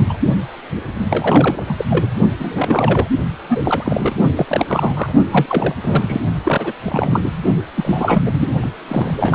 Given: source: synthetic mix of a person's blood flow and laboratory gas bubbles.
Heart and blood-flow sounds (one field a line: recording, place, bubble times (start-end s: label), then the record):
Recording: Doppler ultrasound of blood flow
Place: precordium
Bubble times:
0.00-0.20 s: bubbles
0.76-0.82 s: bubbles
0.95-1.05 s: bubbles
1.09-1.63 s: bubbles
1.67-1.85 s: bubbles
1.90-2.09 s: bubbles
2.38-3.08 s: bubbles
3.48-4.15 s: bubbles
4.36-5.12 s: bubbles
5.31-5.74 s: bubbles
5.83-6.19 s: bubbles
6.45-6.73 s: bubbles
6.83-7.32 s: bubbles
7.75-8.23 s: bubbles
8.25-8.48 s: bubbles
8.61-8.70 s: bubbles
8.88-9.35 s: bubbles
From the record:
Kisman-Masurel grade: 343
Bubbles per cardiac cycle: rolling drumbeat, 9 or more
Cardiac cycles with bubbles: 100%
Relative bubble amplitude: loud (0.450 to 0.775)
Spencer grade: 3 (all of the cardiac periods contain showers or single bubble signals, but not dominating or overriding the cardiac motion signals)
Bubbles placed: only in the low amplitude regions of the cardiac cycle